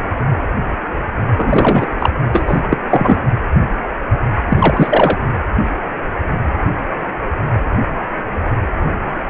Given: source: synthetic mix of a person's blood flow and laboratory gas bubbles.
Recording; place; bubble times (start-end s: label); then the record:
Doppler ultrasound of blood flow; precordium
1.36-1.88 s: bubbles
1.98-2.10 s: bubbles
2.33-2.67 s: bubbles
2.70-2.77 s: bubbles
2.90-3.17 s: bubbles
4.48-5.19 s: bubbles
From the record:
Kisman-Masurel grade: 223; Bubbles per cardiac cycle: several, 3 to 8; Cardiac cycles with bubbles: 10 to 50%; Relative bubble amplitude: loud (0.450 to 0.775); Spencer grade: 2 (many but less than half of the cardiac periods contain bubble signals, singularly or in groups); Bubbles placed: anywhere in the cardiac cycle